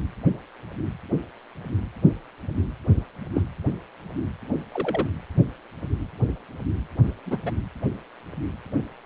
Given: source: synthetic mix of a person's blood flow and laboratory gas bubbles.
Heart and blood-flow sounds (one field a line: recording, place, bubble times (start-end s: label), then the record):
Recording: Doppler ultrasound of blood flow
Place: precordium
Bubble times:
3.34-3.45 s: bubbles
4.72-5.07 s: bubbles
7.26-7.38 s: bubbles
7.45-7.51 s: bubbles
From the record:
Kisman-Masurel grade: 121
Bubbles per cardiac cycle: 1 to 2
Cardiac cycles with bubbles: 10 to 50%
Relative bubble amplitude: barely perceptible (0.100 to 0.250)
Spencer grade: 2 (many but less than half of the cardiac periods contain bubble signals, singularly or in groups)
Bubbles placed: anywhere in the cardiac cycle